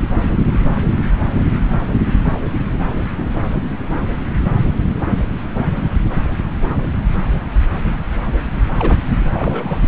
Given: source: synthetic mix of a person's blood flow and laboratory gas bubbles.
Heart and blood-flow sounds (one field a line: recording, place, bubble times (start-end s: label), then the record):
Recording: Doppler ultrasound of blood flow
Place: subclavian vein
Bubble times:
8.78-9.00 s: bubbles
9.09-9.17 s: bubbles
9.30-9.79 s: bubbles
From the record:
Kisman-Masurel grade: 212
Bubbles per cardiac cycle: several, 3 to 8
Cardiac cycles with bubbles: 1 to 10%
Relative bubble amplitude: moderate (0.250 to 0.450)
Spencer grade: 1 (occasional bubble signal discernible with the cardiac motion signal, with majority of cardiac periods free of bubbles)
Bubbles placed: anywhere in the cardiac cycle